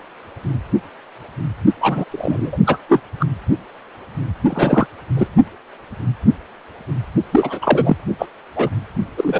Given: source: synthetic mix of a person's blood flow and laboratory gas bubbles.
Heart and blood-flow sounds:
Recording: Doppler ultrasound of blood flow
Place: precordium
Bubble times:
1.81-2.04 s: bubbles
2.12-2.58 s: bubbles
2.67-2.77 s: bubbles
2.89-3.00 s: bubbles
3.20-3.26 s: bubbles
4.49-4.87 s: bubbles
5.17-5.27 s: bubbles
7.31-7.59 s: bubbles
7.62-7.97 s: bubbles
8.18-8.26 s: bubbles
8.55-8.69 s: bubbles
9.16-9.40 s: bubbles
From the record:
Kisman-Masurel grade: 233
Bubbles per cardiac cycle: several, 3 to 8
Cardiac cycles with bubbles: 50 to 99%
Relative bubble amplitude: loud (0.450 to 0.775)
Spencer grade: 3 (all of the cardiac periods contain showers or single bubble signals, but not dominating or overriding the cardiac motion signals)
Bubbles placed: only in the low amplitude regions of the cardiac cycle

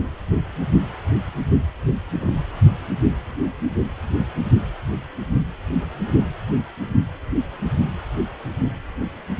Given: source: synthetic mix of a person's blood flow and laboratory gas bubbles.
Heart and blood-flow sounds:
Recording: Doppler ultrasound of blood flow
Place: precordium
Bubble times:
2.21-2.32 s: bubbles
From the record:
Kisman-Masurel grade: 111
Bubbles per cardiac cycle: 1 to 2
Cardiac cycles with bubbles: 1 to 10%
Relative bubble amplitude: barely perceptible (0.100 to 0.250)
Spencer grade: 1 (occasional bubble signal discernible with the cardiac motion signal, with majority of cardiac periods free of bubbles)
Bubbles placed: anywhere in the cardiac cycle

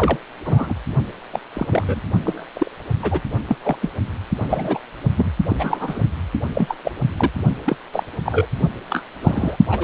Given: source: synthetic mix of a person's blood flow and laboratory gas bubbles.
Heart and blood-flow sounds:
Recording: Doppler ultrasound of blood flow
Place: precordium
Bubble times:
0.00-0.17 s: bubbles
0.46-0.74 s: bubbles
1.31-1.40 s: bubbles
1.53-1.66 s: bubbles
1.69-2.01 s: bubbles
2.25-2.46 s: bubbles
2.55-2.70 s: bubbles
3.02-3.21 s: bubbles
3.47-3.56 s: bubbles
3.63-3.76 s: bubbles
3.81-3.91 s: bubbles
4.40-4.79 s: bubbles
5.17-5.29 s: bubbles
5.50-5.56 s: bubbles
5.58-6.01 s: bubbles
6.54-6.77 s: bubbles
6.84-6.92 s: bubbles
7.17-7.30 s: bubbles
7.66-7.76 s: bubbles
7.93-8.03 s: bubbles
8.25-8.46 s: bubbles
8.90-9.04 s: bubbles
9.20-9.56 s: bubbles
9.70-9.83 s: bubbles
From the record:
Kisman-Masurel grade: 242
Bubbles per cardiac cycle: several, 3 to 8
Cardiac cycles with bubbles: 100%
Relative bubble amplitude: moderate (0.250 to 0.450)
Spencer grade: 3 (all of the cardiac periods contain showers or single bubble signals, but not dominating or overriding the cardiac motion signals)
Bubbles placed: only in the low amplitude regions of the cardiac cycle

